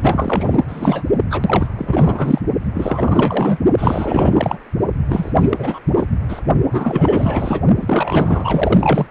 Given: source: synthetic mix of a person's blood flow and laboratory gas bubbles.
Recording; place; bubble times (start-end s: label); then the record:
Doppler ultrasound of blood flow; precordium
0.01-1.04 s: bubbles
1.29-1.68 s: bubbles
1.78-2.41 s: bubbles
2.75-3.58 s: bubbles
3.77-4.58 s: bubbles
5.09-5.32 s: bubbles
5.39-5.79 s: bubbles
5.92-6.05 s: bubbles
6.29-6.41 s: bubbles
6.71-7.62 s: bubbles
7.79-9.06 s: bubbles
From the record:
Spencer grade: 4 (maximum detectable bubble signal sounding continuously throughout systole and diastole of every cardiac period, and overriding the amplitude of the normal cardiac signals); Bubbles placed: only in the low amplitude regions of the cardiac cycle